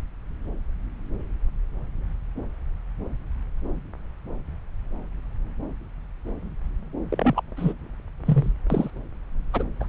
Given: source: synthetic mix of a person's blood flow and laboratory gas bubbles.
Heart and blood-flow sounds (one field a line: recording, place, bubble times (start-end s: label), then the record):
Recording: Doppler ultrasound of blood flow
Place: subclavian vein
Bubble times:
7.11-7.41 s: bubbles
7.57-7.73 s: bubbles
8.25-8.52 s: bubbles
8.70-8.90 s: bubbles
9.53-9.63 s: bubbles
9.80-9.86 s: bubbles
From the record:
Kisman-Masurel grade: 222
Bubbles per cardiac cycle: several, 3 to 8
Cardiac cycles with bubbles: 10 to 50%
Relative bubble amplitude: moderate (0.250 to 0.450)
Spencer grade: 2 (many but less than half of the cardiac periods contain bubble signals, singularly or in groups)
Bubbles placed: anywhere in the cardiac cycle